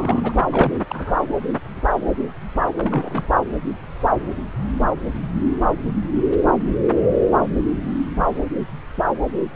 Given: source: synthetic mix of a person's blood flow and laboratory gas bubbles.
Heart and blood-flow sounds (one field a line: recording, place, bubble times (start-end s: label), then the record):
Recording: Doppler ultrasound of blood flow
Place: subclavian vein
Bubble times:
0.00-0.39 s: bubbles
0.50-0.73 s: bubbles
0.88-1.14 s: bubbles
2.77-3.27 s: bubbles
From the record:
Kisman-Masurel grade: 222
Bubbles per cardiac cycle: several, 3 to 8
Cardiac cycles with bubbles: 10 to 50%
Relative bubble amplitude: moderate (0.250 to 0.450)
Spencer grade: 2 (many but less than half of the cardiac periods contain bubble signals, singularly or in groups)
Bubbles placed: anywhere in the cardiac cycle